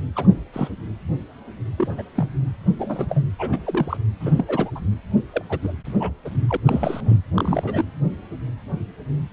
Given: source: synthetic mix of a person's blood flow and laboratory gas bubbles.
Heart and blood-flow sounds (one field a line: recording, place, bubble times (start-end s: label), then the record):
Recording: Doppler ultrasound of blood flow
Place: precordium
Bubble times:
0.15-0.28 s: bubbles
0.53-0.69 s: bubbles
1.77-2.02 s: bubbles
2.15-2.48 s: bubbles
2.78-3.06 s: bubbles
3.09-3.21 s: bubbles
3.38-3.58 s: bubbles
3.65-3.97 s: bubbles
4.20-4.44 s: bubbles
4.48-4.71 s: bubbles
4.75-4.80 s: bubbles
5.33-5.44 s: bubbles
5.49-5.59 s: bubbles
5.62-5.72 s: bubbles
6.00-6.11 s: bubbles
6.25-6.29 s: bubbles
6.48-6.57 s: bubbles
6.66-7.17 s: bubbles
7.34-7.84 s: bubbles
From the record:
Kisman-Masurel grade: 232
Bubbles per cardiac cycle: several, 3 to 8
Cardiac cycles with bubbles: 50 to 99%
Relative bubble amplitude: moderate (0.250 to 0.450)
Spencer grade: 3 (all of the cardiac periods contain showers or single bubble signals, but not dominating or overriding the cardiac motion signals)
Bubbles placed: anywhere in the cardiac cycle